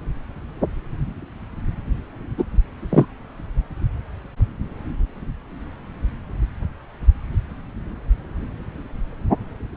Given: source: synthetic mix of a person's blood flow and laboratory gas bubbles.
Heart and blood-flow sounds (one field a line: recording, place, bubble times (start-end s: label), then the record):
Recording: Doppler ultrasound of blood flow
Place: subclavian vein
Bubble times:
2.38-2.44 s: bubbles
2.90-3.05 s: bubbles
From the record:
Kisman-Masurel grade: 123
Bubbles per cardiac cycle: 1 to 2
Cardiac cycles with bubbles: 10 to 50%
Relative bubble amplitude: loud (0.450 to 0.775)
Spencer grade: 2 (many but less than half of the cardiac periods contain bubble signals, singularly or in groups)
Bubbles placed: anywhere in the cardiac cycle